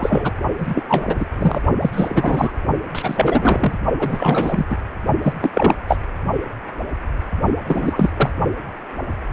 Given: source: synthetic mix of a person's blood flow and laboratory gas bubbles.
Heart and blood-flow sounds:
Doppler ultrasound of blood flow; precordium
0.00-0.34 s: bubbles
0.58-0.83 s: bubbles
0.89-1.05 s: bubbles
1.07-1.26 s: bubbles
1.39-1.61 s: bubbles
1.81-2.55 s: bubbles
2.94-3.76 s: bubbles
3.99-4.67 s: bubbles
4.69-4.76 s: bubbles
5.22-5.33 s: bubbles
5.41-5.50 s: bubbles
5.53-5.75 s: bubbles
5.88-5.98 s: bubbles
7.67-8.11 s: bubbles
8.17-8.31 s: bubbles
From the record:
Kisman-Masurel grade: 333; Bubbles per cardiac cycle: rolling drumbeat, 9 or more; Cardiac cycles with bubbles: 50 to 99%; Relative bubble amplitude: loud (0.450 to 0.775); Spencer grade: 3 (all of the cardiac periods contain showers or single bubble signals, but not dominating or overriding the cardiac motion signals); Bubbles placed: only in the low amplitude regions of the cardiac cycle

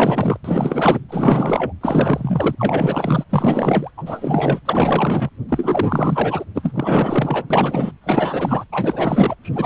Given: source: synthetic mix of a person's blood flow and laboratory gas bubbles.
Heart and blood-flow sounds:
Doppler ultrasound of blood flow; precordium
0.00-0.37 s: bubbles
0.44-0.99 s: bubbles
1.08-1.73 s: bubbles
1.81-2.55 s: bubbles
2.57-3.24 s: bubbles
3.29-3.90 s: bubbles
3.97-4.03 s: bubbles
4.06-4.61 s: bubbles
4.65-5.30 s: bubbles
5.49-6.45 s: bubbles
6.55-7.45 s: bubbles
7.50-7.92 s: bubbles
8.01-8.64 s: bubbles
8.72-9.35 s: bubbles
9.43-9.66 s: bubbles
From the record:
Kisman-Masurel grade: 444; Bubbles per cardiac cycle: continuous sound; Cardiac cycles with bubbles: 100%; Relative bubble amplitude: maximal (0.775 to 0.999); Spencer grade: 4 (maximum detectable bubble signal sounding continuously throughout systole and diastole of every cardiac period, and overriding the amplitude of the normal cardiac signals); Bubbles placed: anywhere in the cardiac cycle

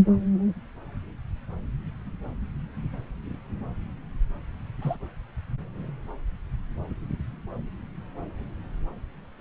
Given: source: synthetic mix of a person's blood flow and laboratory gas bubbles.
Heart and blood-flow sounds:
Doppler ultrasound of blood flow; subclavian vein
4.81-4.97 s: bubbles
From the record:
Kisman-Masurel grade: 121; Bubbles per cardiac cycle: 1 to 2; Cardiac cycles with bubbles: 10 to 50%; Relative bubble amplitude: barely perceptible (0.100 to 0.250); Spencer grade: 2 (many but less than half of the cardiac periods contain bubble signals, singularly or in groups); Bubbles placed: anywhere in the cardiac cycle

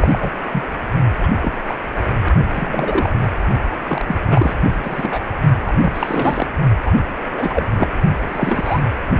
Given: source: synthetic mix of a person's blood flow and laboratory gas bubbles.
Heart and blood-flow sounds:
Doppler ultrasound of blood flow; precordium
0.00-0.31 s: bubbles
0.51-0.62 s: bubbles
1.23-1.27 s: bubbles
1.42-1.52 s: bubbles
1.68-1.75 s: bubbles
2.51-3.11 s: bubbles
3.21-3.27 s: bubbles
3.87-4.05 s: bubbles
4.07-4.15 s: bubbles
4.25-4.54 s: bubbles
4.62-4.76 s: bubbles
4.82-5.19 s: bubbles
5.66-5.74 s: bubbles
5.79-6.49 s: bubbles
6.85-6.93 s: bubbles
7.33-7.66 s: bubbles
7.79-7.88 s: bubbles
8.28-8.80 s: bubbles
From the record:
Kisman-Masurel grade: 232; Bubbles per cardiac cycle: several, 3 to 8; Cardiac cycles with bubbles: 50 to 99%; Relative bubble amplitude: moderate (0.250 to 0.450); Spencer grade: 3 (all of the cardiac periods contain showers or single bubble signals, but not dominating or overriding the cardiac motion signals); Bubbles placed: only in the low amplitude regions of the cardiac cycle

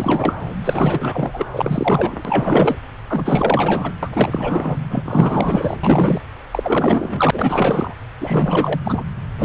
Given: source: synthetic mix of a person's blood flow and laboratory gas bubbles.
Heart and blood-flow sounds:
Doppler ultrasound of blood flow; subclavian vein
0.00-0.34 s: bubbles
0.64-1.46 s: bubbles
1.53-2.76 s: bubbles
3.08-3.93 s: bubbles
4.03-4.76 s: bubbles
4.90-5.76 s: bubbles
5.83-6.21 s: bubbles
6.51-7.94 s: bubbles
8.20-8.79 s: bubbles
8.83-9.03 s: bubbles
9.38-9.45 s: bubbles
From the record:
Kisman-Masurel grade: 444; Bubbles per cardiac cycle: continuous sound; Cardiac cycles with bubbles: 100%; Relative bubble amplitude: maximal (0.775 to 0.999); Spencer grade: 4 (maximum detectable bubble signal sounding continuously throughout systole and diastole of every cardiac period, and overriding the amplitude of the normal cardiac signals); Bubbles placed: anywhere in the cardiac cycle

